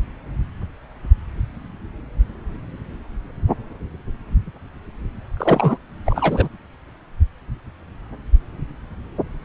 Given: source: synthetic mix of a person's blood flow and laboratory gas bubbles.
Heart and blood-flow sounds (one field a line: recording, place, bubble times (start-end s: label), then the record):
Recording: Doppler ultrasound of blood flow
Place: subclavian vein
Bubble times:
5.37-5.78 s: bubbles
6.06-6.49 s: bubbles
From the record:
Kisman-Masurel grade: 213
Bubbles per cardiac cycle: several, 3 to 8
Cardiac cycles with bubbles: 1 to 10%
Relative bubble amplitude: loud (0.450 to 0.775)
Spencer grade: 1 (occasional bubble signal discernible with the cardiac motion signal, with majority of cardiac periods free of bubbles)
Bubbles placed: anywhere in the cardiac cycle